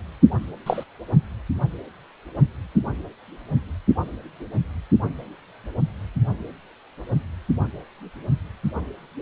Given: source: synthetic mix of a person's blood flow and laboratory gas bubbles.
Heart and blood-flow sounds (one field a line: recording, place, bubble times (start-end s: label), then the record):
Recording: Doppler ultrasound of blood flow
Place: precordium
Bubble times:
0.66-0.83 s: bubbles
From the record:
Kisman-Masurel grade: 113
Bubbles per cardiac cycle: 1 to 2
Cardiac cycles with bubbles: 1 to 10%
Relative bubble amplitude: loud (0.450 to 0.775)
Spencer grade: 1 (occasional bubble signal discernible with the cardiac motion signal, with majority of cardiac periods free of bubbles)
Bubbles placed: only in the low amplitude regions of the cardiac cycle